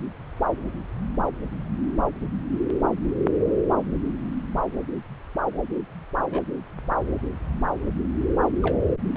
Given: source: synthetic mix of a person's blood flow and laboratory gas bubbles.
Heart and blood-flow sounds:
Doppler ultrasound of blood flow; subclavian vein
6.17-6.42 s: bubbles
8.62-8.83 s: bubbles
From the record:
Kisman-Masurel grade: 121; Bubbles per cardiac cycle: 1 to 2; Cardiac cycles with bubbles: 10 to 50%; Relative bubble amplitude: barely perceptible (0.100 to 0.250); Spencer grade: 2 (many but less than half of the cardiac periods contain bubble signals, singularly or in groups); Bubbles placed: anywhere in the cardiac cycle

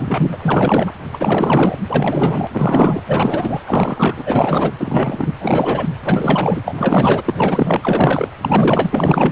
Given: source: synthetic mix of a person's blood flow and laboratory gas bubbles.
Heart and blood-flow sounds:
Doppler ultrasound of blood flow; precordium
0.00-0.93 s: bubbles
1.13-1.77 s: bubbles
1.89-2.47 s: bubbles
2.52-3.03 s: bubbles
3.06-3.61 s: bubbles
3.66-4.72 s: bubbles
4.79-5.34 s: bubbles
5.39-5.89 s: bubbles
6.04-6.62 s: bubbles
6.66-7.22 s: bubbles
7.25-8.31 s: bubbles
8.41-9.31 s: bubbles
From the record:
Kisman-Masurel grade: 444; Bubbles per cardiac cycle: continuous sound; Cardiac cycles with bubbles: 100%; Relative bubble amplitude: maximal (0.775 to 0.999); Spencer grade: 4 (maximum detectable bubble signal sounding continuously throughout systole and diastole of every cardiac period, and overriding the amplitude of the normal cardiac signals); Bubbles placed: anywhere in the cardiac cycle

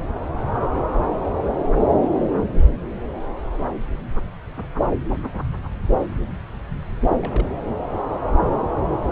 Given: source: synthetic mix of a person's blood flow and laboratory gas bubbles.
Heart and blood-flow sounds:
Doppler ultrasound of blood flow; subclavian vein
7.00-7.51 s: bubbles
From the record:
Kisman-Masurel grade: 211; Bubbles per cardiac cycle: several, 3 to 8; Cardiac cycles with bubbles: 1 to 10%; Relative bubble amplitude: barely perceptible (0.100 to 0.250); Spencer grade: 1 (occasional bubble signal discernible with the cardiac motion signal, with majority of cardiac periods free of bubbles); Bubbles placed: anywhere in the cardiac cycle

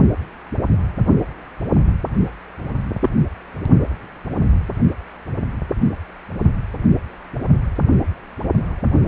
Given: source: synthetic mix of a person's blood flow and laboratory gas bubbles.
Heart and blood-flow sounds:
Doppler ultrasound of blood flow; precordium
3.01-3.09 s: bubbles
From the record:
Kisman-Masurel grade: 112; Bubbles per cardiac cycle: 1 to 2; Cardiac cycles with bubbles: 1 to 10%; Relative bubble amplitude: moderate (0.250 to 0.450); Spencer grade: 1 (occasional bubble signal discernible with the cardiac motion signal, with majority of cardiac periods free of bubbles); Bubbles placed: only in the low amplitude regions of the cardiac cycle

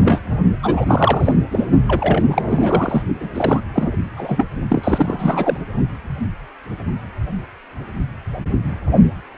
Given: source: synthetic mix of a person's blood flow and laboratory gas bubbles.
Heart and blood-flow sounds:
Doppler ultrasound of blood flow; precordium
0.03-0.20 s: bubbles
0.63-1.32 s: bubbles
1.51-1.64 s: bubbles
1.87-2.42 s: bubbles
2.45-3.03 s: bubbles
3.20-3.29 s: bubbles
3.34-3.60 s: bubbles
3.73-3.91 s: bubbles
4.17-4.44 s: bubbles
4.69-5.58 s: bubbles
From the record:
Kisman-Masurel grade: 333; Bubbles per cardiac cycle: rolling drumbeat, 9 or more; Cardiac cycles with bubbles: 50 to 99%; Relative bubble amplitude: loud (0.450 to 0.775); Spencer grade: 3 (all of the cardiac periods contain showers or single bubble signals, but not dominating or overriding the cardiac motion signals); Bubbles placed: only in the low amplitude regions of the cardiac cycle

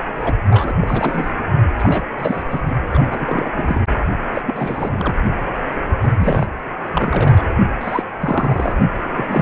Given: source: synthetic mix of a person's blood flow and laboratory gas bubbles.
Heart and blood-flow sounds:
Doppler ultrasound of blood flow; precordium
0.01-0.36 s: bubbles
0.47-0.73 s: bubbles
0.81-1.33 s: bubbles
1.77-2.05 s: bubbles
2.18-2.42 s: bubbles
2.49-2.62 s: bubbles
2.67-2.77 s: bubbles
2.89-3.83 s: bubbles
3.99-4.06 s: bubbles
4.33-4.42 s: bubbles
4.46-5.15 s: bubbles
6.01-6.13 s: bubbles
6.18-6.46 s: bubbles
6.84-7.46 s: bubbles
7.81-8.03 s: bubbles
8.21-8.76 s: bubbles
9.15-9.42 s: bubbles
From the record:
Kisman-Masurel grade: 342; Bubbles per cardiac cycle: rolling drumbeat, 9 or more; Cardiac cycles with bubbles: 100%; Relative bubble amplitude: moderate (0.250 to 0.450); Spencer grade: 3 (all of the cardiac periods contain showers or single bubble signals, but not dominating or overriding the cardiac motion signals); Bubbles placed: anywhere in the cardiac cycle

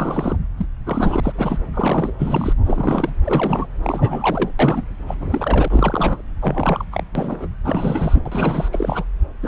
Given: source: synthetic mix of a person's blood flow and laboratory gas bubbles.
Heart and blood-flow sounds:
Doppler ultrasound of blood flow; subclavian vein
0.00-0.36 s: bubbles
0.57-0.66 s: bubbles
0.85-1.59 s: bubbles
1.73-2.13 s: bubbles
2.18-2.53 s: bubbles
2.65-3.10 s: bubbles
3.24-3.67 s: bubbles
3.83-4.50 s: bubbles
4.59-4.83 s: bubbles
5.07-5.15 s: bubbles
5.20-6.22 s: bubbles
6.40-6.85 s: bubbles
6.92-7.03 s: bubbles
7.15-7.47 s: bubbles
7.64-8.21 s: bubbles
8.26-8.69 s: bubbles
8.72-9.05 s: bubbles
9.42-9.48 s: bubbles
From the record:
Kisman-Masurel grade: 332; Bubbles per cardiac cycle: rolling drumbeat, 9 or more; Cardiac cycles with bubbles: 50 to 99%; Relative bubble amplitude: moderate (0.250 to 0.450); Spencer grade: 3 (all of the cardiac periods contain showers or single bubble signals, but not dominating or overriding the cardiac motion signals); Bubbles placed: anywhere in the cardiac cycle

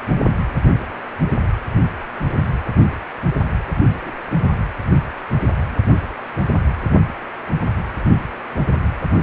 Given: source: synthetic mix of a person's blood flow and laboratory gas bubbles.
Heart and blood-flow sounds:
Doppler ultrasound of blood flow; precordium
4.01-4.21 s: bubbles
4.25-4.29 s: bubbles
From the record:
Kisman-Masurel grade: 121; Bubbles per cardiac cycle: 1 to 2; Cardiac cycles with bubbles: 10 to 50%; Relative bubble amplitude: barely perceptible (0.100 to 0.250); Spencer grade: 2 (many but less than half of the cardiac periods contain bubble signals, singularly or in groups); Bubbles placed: anywhere in the cardiac cycle

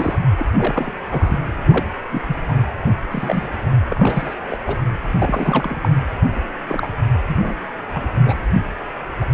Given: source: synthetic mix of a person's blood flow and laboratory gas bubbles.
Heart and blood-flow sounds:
Doppler ultrasound of blood flow; precordium
0.00-0.20 s: bubbles
0.36-0.46 s: bubbles
0.56-0.91 s: bubbles
1.10-1.40 s: bubbles
1.67-1.86 s: bubbles
2.12-2.22 s: bubbles
2.27-2.36 s: bubbles
2.48-2.58 s: bubbles
3.10-3.48 s: bubbles
3.89-4.34 s: bubbles
4.49-4.57 s: bubbles
4.66-4.76 s: bubbles
5.18-5.76 s: bubbles
5.82-5.89 s: bubbles
6.67-6.87 s: bubbles
7.26-7.52 s: bubbles
7.92-8.37 s: bubbles
9.21-9.25 s: bubbles
From the record:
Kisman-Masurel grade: 242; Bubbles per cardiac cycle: several, 3 to 8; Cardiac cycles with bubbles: 100%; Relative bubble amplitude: moderate (0.250 to 0.450); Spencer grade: 3 (all of the cardiac periods contain showers or single bubble signals, but not dominating or overriding the cardiac motion signals); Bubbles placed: anywhere in the cardiac cycle

